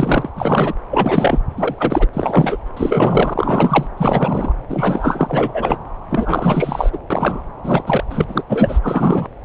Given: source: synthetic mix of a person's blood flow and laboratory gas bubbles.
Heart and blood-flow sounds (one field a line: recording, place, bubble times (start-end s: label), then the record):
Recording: Doppler ultrasound of blood flow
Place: subclavian vein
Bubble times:
0.00-0.30 s: bubbles
0.36-0.73 s: bubbles
0.91-1.39 s: bubbles
1.56-2.07 s: bubbles
2.13-2.57 s: bubbles
2.77-3.88 s: bubbles
3.97-4.53 s: bubbles
4.70-5.78 s: bubbles
6.10-6.90 s: bubbles
6.93-6.98 s: bubbles
7.10-7.42 s: bubbles
7.64-7.84 s: bubbles
7.86-8.04 s: bubbles
8.10-8.25 s: bubbles
8.28-8.43 s: bubbles
8.49-8.79 s: bubbles
8.83-9.28 s: bubbles
From the record:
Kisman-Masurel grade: 343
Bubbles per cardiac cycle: rolling drumbeat, 9 or more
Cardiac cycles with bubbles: 100%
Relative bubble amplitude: loud (0.450 to 0.775)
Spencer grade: 3 (all of the cardiac periods contain showers or single bubble signals, but not dominating or overriding the cardiac motion signals)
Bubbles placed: anywhere in the cardiac cycle